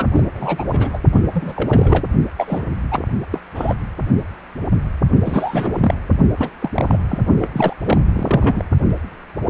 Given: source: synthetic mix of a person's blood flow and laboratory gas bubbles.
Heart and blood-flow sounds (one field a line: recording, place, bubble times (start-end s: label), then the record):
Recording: Doppler ultrasound of blood flow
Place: precordium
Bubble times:
0.00-0.05 s: bubbles
0.12-0.23 s: bubbles
0.34-0.66 s: bubbles
0.70-0.90 s: bubbles
0.93-0.98 s: bubbles
1.14-1.22 s: bubbles
1.34-2.04 s: bubbles
2.36-2.63 s: bubbles
2.92-3.00 s: bubbles
3.30-3.39 s: bubbles
3.54-3.76 s: bubbles
5.25-5.94 s: bubbles
6.36-6.50 s: bubbles
6.62-6.98 s: bubbles
7.08-7.19 s: bubbles
7.37-7.49 s: bubbles
7.53-7.73 s: bubbles
7.85-7.98 s: bubbles
8.12-8.64 s: bubbles
From the record:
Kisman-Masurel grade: 332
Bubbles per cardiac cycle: rolling drumbeat, 9 or more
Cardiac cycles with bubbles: 50 to 99%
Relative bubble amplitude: moderate (0.250 to 0.450)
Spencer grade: 3 (all of the cardiac periods contain showers or single bubble signals, but not dominating or overriding the cardiac motion signals)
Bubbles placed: only in the low amplitude regions of the cardiac cycle